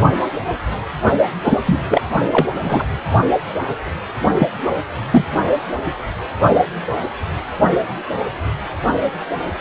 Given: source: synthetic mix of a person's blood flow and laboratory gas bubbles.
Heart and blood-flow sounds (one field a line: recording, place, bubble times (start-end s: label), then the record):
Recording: Doppler ultrasound of blood flow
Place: precordium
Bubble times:
1.44-1.58 s: bubbles
1.65-1.79 s: bubbles
1.89-2.02 s: bubbles
2.33-2.47 s: bubbles
2.53-2.85 s: bubbles
4.38-4.48 s: bubbles
5.10-5.25 s: bubbles
From the record:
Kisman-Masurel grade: 223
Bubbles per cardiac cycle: several, 3 to 8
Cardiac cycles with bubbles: 10 to 50%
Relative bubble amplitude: loud (0.450 to 0.775)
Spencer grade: 2 (many but less than half of the cardiac periods contain bubble signals, singularly or in groups)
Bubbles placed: only in the low amplitude regions of the cardiac cycle